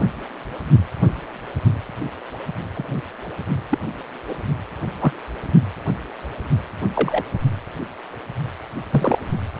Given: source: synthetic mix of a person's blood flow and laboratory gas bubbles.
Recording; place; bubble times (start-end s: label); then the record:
Doppler ultrasound of blood flow; precordium
2.74-3.02 s: bubbles
3.69-3.78 s: bubbles
4.27-4.34 s: bubbles
5.01-5.12 s: bubbles
6.95-7.24 s: bubbles
8.90-9.18 s: bubbles
From the record:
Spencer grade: 2 (many but less than half of the cardiac periods contain bubble signals, singularly or in groups); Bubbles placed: only in the low amplitude regions of the cardiac cycle